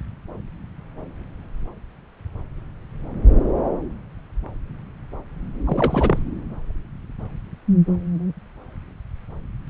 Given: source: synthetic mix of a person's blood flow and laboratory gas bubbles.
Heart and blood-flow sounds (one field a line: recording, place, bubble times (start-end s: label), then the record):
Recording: Doppler ultrasound of blood flow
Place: subclavian vein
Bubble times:
5.65-6.22 s: bubbles
From the record:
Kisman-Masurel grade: 213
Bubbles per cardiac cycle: several, 3 to 8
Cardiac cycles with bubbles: 1 to 10%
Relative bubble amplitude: loud (0.450 to 0.775)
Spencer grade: 1 (occasional bubble signal discernible with the cardiac motion signal, with majority of cardiac periods free of bubbles)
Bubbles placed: anywhere in the cardiac cycle